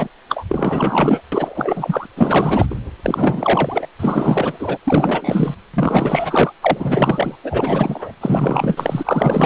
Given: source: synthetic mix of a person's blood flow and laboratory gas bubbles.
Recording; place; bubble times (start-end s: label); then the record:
Doppler ultrasound of blood flow; precordium
0.00-0.08 s: bubbles
0.29-0.44 s: bubbles
0.49-1.21 s: bubbles
1.32-2.06 s: bubbles
2.16-2.66 s: bubbles
2.70-2.76 s: bubbles
3.04-3.87 s: bubbles
3.99-4.78 s: bubbles
4.84-5.54 s: bubbles
5.73-6.54 s: bubbles
6.61-7.35 s: bubbles
7.42-8.11 s: bubbles
8.20-9.46 s: bubbles
From the record:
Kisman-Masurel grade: 444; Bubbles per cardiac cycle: continuous sound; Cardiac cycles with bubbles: 100%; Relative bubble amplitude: maximal (0.775 to 0.999); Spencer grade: 4 (maximum detectable bubble signal sounding continuously throughout systole and diastole of every cardiac period, and overriding the amplitude of the normal cardiac signals); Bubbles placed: anywhere in the cardiac cycle